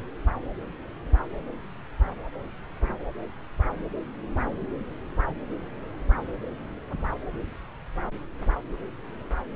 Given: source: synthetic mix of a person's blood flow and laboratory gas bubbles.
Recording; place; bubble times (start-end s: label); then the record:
Doppler ultrasound of blood flow; subclavian vein
no bubbles
From the record:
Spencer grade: 0 (complete lack of bubble signals)